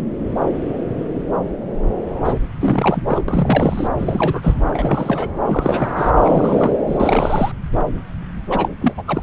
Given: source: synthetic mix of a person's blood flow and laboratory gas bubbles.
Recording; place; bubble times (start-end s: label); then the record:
Doppler ultrasound of blood flow; subclavian vein
2.25-2.40 s: bubbles
2.60-3.01 s: bubbles
3.08-3.22 s: bubbles
3.28-3.88 s: bubbles
3.98-4.54 s: bubbles
4.69-5.34 s: bubbles
5.46-6.10 s: bubbles
6.17-6.76 s: bubbles
6.87-7.52 s: bubbles
8.50-8.69 s: bubbles
8.80-8.94 s: bubbles
8.98-9.03 s: bubbles
9.07-9.23 s: bubbles
From the record:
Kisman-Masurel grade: 332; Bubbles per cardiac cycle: rolling drumbeat, 9 or more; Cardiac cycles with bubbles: 50 to 99%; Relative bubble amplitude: moderate (0.250 to 0.450); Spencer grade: 3 (all of the cardiac periods contain showers or single bubble signals, but not dominating or overriding the cardiac motion signals); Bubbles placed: anywhere in the cardiac cycle